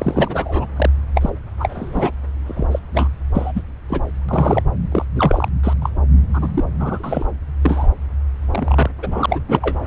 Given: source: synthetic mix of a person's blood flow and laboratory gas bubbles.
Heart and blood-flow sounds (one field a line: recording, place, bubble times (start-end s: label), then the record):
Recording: Doppler ultrasound of blood flow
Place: subclavian vein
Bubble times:
0.00-0.66 s: bubbles
0.76-0.90 s: bubbles
1.15-1.30 s: bubbles
1.59-2.11 s: bubbles
2.47-2.65 s: bubbles
2.71-2.79 s: bubbles
2.91-3.13 s: bubbles
3.34-3.52 s: bubbles
3.55-3.61 s: bubbles
3.88-4.01 s: bubbles
4.29-4.62 s: bubbles
4.92-5.05 s: bubbles
5.15-5.49 s: bubbles
5.63-5.74 s: bubbles
5.82-5.90 s: bubbles
6.34-6.64 s: bubbles
6.80-7.27 s: bubbles
7.62-7.90 s: bubbles
8.51-8.90 s: bubbles
9.03-9.39 s: bubbles
9.48-9.77 s: bubbles
From the record:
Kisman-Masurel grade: 243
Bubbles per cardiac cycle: several, 3 to 8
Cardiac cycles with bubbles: 100%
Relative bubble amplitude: loud (0.450 to 0.775)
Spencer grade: 3 (all of the cardiac periods contain showers or single bubble signals, but not dominating or overriding the cardiac motion signals)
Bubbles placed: anywhere in the cardiac cycle